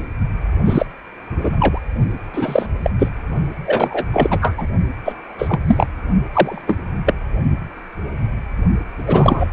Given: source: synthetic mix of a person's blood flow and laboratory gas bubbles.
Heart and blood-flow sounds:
Doppler ultrasound of blood flow; precordium
0.00-0.07 s: bubbles
0.65-0.86 s: bubbles
1.38-1.79 s: bubbles
2.33-2.66 s: bubbles
2.83-2.91 s: bubbles
2.98-3.08 s: bubbles
3.65-4.05 s: bubbles
4.13-4.38 s: bubbles
4.41-4.67 s: bubbles
5.04-5.13 s: bubbles
5.38-5.59 s: bubbles
5.67-5.86 s: bubbles
6.31-6.62 s: bubbles
6.67-6.78 s: bubbles
7.05-7.14 s: bubbles
9.07-9.50 s: bubbles
From the record:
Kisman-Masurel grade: 233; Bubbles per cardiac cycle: several, 3 to 8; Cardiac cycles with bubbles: 50 to 99%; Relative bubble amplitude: loud (0.450 to 0.775); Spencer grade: 3 (all of the cardiac periods contain showers or single bubble signals, but not dominating or overriding the cardiac motion signals); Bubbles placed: only in the low amplitude regions of the cardiac cycle

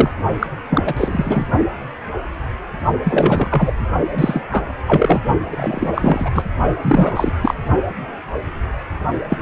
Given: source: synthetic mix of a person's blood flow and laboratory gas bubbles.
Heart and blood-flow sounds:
Doppler ultrasound of blood flow; precordium
0.00-0.09 s: bubbles
0.40-0.47 s: bubbles
0.69-1.47 s: bubbles
3.04-3.73 s: bubbles
4.17-4.44 s: bubbles
4.51-4.66 s: bubbles
4.87-5.21 s: bubbles
5.50-6.29 s: bubbles
6.34-6.43 s: bubbles
6.82-7.33 s: bubbles
7.41-7.54 s: bubbles
9.29-9.38 s: bubbles
From the record:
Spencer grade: 3 (all of the cardiac periods contain showers or single bubble signals, but not dominating or overriding the cardiac motion signals); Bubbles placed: only in the low amplitude regions of the cardiac cycle

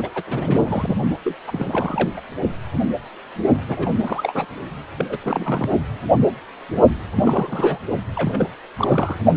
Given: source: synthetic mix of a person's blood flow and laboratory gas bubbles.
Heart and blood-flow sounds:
Doppler ultrasound of blood flow; precordium
0.00-0.22 s: bubbles
0.27-0.96 s: bubbles
1.25-1.34 s: bubbles
1.47-2.10 s: bubbles
2.16-2.21 s: bubbles
3.68-3.91 s: bubbles
3.94-4.00 s: bubbles
4.03-4.46 s: bubbles
4.97-5.06 s: bubbles
5.09-5.17 s: bubbles
5.20-5.69 s: bubbles
7.15-7.78 s: bubbles
8.15-8.47 s: bubbles
8.75-9.21 s: bubbles
From the record:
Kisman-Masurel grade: 332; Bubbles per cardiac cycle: rolling drumbeat, 9 or more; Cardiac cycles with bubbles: 50 to 99%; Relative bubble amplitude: moderate (0.250 to 0.450); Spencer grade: 3 (all of the cardiac periods contain showers or single bubble signals, but not dominating or overriding the cardiac motion signals); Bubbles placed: only in the low amplitude regions of the cardiac cycle

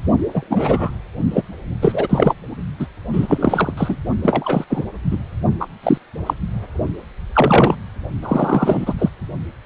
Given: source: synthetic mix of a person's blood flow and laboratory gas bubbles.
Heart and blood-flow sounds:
Doppler ultrasound of blood flow; precordium
0.34-0.90 s: bubbles
1.31-1.42 s: bubbles
1.81-2.33 s: bubbles
2.79-2.87 s: bubbles
3.13-3.74 s: bubbles
3.77-3.96 s: bubbles
4.23-4.65 s: bubbles
4.70-4.83 s: bubbles
5.11-5.18 s: bubbles
5.60-5.67 s: bubbles
5.83-5.98 s: bubbles
6.26-6.34 s: bubbles
7.33-7.75 s: bubbles
8.22-8.94 s: bubbles
8.98-9.09 s: bubbles
From the record:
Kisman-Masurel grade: 233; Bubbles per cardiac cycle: several, 3 to 8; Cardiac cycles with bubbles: 50 to 99%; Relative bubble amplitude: loud (0.450 to 0.775); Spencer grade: 3 (all of the cardiac periods contain showers or single bubble signals, but not dominating or overriding the cardiac motion signals); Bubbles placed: only in the low amplitude regions of the cardiac cycle

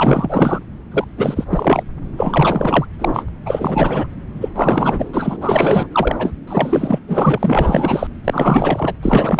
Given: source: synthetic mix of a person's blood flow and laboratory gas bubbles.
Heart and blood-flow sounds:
Doppler ultrasound of blood flow; subclavian vein
0.00-0.59 s: bubbles
0.91-1.04 s: bubbles
1.17-1.44 s: bubbles
1.50-1.83 s: bubbles
2.17-2.86 s: bubbles
2.99-3.24 s: bubbles
3.46-4.07 s: bubbles
4.41-4.49 s: bubbles
4.55-5.09 s: bubbles
5.13-5.37 s: bubbles
5.41-5.87 s: bubbles
5.92-6.32 s: bubbles
6.47-7.00 s: bubbles
7.08-8.07 s: bubbles
8.24-8.94 s: bubbles
9.03-9.40 s: bubbles
From the record:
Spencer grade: 4 (maximum detectable bubble signal sounding continuously throughout systole and diastole of every cardiac period, and overriding the amplitude of the normal cardiac signals); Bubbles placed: anywhere in the cardiac cycle

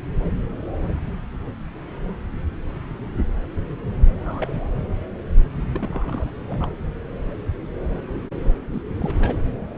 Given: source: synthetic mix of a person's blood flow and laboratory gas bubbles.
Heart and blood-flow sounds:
Doppler ultrasound of blood flow; subclavian vein
4.17-4.69 s: bubbles
5.75-6.31 s: bubbles
6.47-6.71 s: bubbles
8.71-8.82 s: bubbles
9.00-9.37 s: bubbles
From the record:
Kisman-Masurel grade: 221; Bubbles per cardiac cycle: several, 3 to 8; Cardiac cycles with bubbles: 10 to 50%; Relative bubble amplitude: barely perceptible (0.100 to 0.250); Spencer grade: 2 (many but less than half of the cardiac periods contain bubble signals, singularly or in groups); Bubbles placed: anywhere in the cardiac cycle

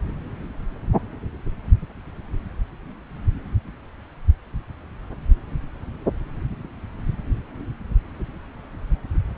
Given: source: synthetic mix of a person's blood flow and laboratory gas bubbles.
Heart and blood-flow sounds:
Doppler ultrasound of blood flow; subclavian vein
no bubbles
From the record:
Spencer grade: 0 (complete lack of bubble signals)

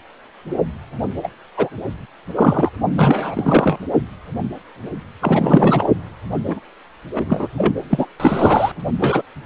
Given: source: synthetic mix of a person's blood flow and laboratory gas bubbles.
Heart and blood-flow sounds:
Doppler ultrasound of blood flow; precordium
1.23-1.28 s: bubbles
1.57-1.69 s: bubbles
2.35-2.69 s: bubbles
2.98-3.78 s: bubbles
5.21-5.88 s: bubbles
6.47-6.60 s: bubbles
7.13-7.47 s: bubbles
7.57-7.73 s: bubbles
7.89-8.07 s: bubbles
8.20-8.72 s: bubbles
8.79-8.81 s: bubbles
8.99-9.22 s: bubbles
From the record:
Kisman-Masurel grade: 233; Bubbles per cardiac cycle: several, 3 to 8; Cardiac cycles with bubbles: 50 to 99%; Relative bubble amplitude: loud (0.450 to 0.775); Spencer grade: 3 (all of the cardiac periods contain showers or single bubble signals, but not dominating or overriding the cardiac motion signals); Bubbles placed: anywhere in the cardiac cycle

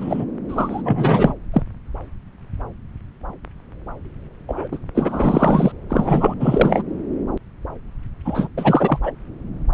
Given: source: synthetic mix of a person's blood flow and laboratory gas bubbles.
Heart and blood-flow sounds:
Doppler ultrasound of blood flow; subclavian vein
0.00-0.24 s: bubbles
0.48-1.34 s: bubbles
1.53-1.62 s: bubbles
4.48-4.67 s: bubbles
4.71-4.79 s: bubbles
4.95-5.72 s: bubbles
5.89-6.34 s: bubbles
6.40-6.83 s: bubbles
8.25-8.48 s: bubbles
8.57-8.98 s: bubbles
9.03-9.11 s: bubbles
9.72-9.74 s: bubbles
From the record:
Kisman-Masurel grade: 333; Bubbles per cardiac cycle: rolling drumbeat, 9 or more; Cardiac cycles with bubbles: 50 to 99%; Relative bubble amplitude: loud (0.450 to 0.775); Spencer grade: 3 (all of the cardiac periods contain showers or single bubble signals, but not dominating or overriding the cardiac motion signals); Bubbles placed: anywhere in the cardiac cycle

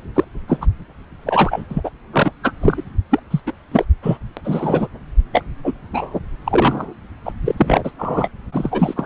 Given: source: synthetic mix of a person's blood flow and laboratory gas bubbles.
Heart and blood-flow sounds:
Doppler ultrasound of blood flow; subclavian vein
0.15-0.24 s: bubbles
0.47-0.57 s: bubbles
0.61-0.67 s: bubbles
1.26-1.65 s: bubbles
1.70-1.81 s: bubbles
1.84-1.90 s: bubbles
2.12-2.33 s: bubbles
2.43-2.51 s: bubbles
2.61-2.83 s: bubbles
3.11-3.21 s: bubbles
3.30-3.41 s: bubbles
3.46-3.53 s: bubbles
3.71-3.85 s: bubbles
4.03-4.17 s: bubbles
4.37-4.41 s: bubbles
4.44-4.88 s: bubbles
5.32-5.44 s: bubbles
5.64-5.74 s: bubbles
5.92-6.20 s: bubbles
6.44-6.94 s: bubbles
7.25-7.33 s: bubbles
7.45-7.55 s: bubbles
7.57-7.91 s: bubbles
7.99-8.30 s: bubbles
8.52-9.06 s: bubbles
From the record:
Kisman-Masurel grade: 243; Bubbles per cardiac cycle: several, 3 to 8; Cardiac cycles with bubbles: 100%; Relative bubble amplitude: loud (0.450 to 0.775); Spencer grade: 3 (all of the cardiac periods contain showers or single bubble signals, but not dominating or overriding the cardiac motion signals); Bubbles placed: anywhere in the cardiac cycle

